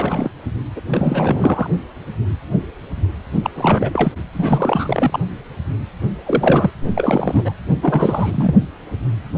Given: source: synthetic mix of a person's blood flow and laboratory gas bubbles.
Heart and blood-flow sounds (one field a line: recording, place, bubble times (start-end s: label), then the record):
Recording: Doppler ultrasound of blood flow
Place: precordium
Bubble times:
0.00-0.31 s: bubbles
0.76-0.81 s: bubbles
0.91-1.70 s: bubbles
3.42-3.50 s: bubbles
3.55-4.12 s: bubbles
4.33-5.20 s: bubbles
6.25-6.71 s: bubbles
6.96-7.53 s: bubbles
7.82-8.55 s: bubbles
From the record:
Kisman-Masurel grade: 333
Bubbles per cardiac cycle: rolling drumbeat, 9 or more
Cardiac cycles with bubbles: 50 to 99%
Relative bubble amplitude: loud (0.450 to 0.775)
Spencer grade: 3 (all of the cardiac periods contain showers or single bubble signals, but not dominating or overriding the cardiac motion signals)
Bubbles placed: only in the low amplitude regions of the cardiac cycle